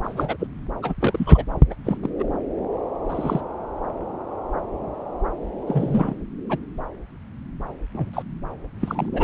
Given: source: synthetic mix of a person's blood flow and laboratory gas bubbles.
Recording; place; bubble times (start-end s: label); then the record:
Doppler ultrasound of blood flow; subclavian vein
0.04-0.36 s: bubbles
0.40-0.47 s: bubbles
0.82-0.94 s: bubbles
1.00-1.44 s: bubbles
1.70-1.75 s: bubbles
1.85-1.97 s: bubbles
2.02-2.09 s: bubbles
2.19-2.24 s: bubbles
3.09-3.41 s: bubbles
5.67-6.15 s: bubbles
6.50-6.58 s: bubbles
7.92-8.22 s: bubbles
8.80-9.09 s: bubbles
9.13-9.24 s: bubbles
From the record:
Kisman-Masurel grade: 232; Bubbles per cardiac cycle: several, 3 to 8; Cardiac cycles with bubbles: 50 to 99%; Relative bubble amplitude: moderate (0.250 to 0.450); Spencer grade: 3 (all of the cardiac periods contain showers or single bubble signals, but not dominating or overriding the cardiac motion signals); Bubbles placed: anywhere in the cardiac cycle